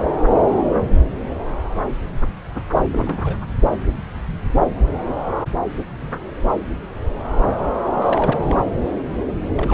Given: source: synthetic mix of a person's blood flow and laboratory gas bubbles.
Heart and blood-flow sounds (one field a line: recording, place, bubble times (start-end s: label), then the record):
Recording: Doppler ultrasound of blood flow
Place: subclavian vein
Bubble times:
2.85-3.37 s: bubbles
8.02-8.62 s: bubbles
9.56-9.74 s: bubbles
From the record:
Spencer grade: 2 (many but less than half of the cardiac periods contain bubble signals, singularly or in groups)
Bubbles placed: anywhere in the cardiac cycle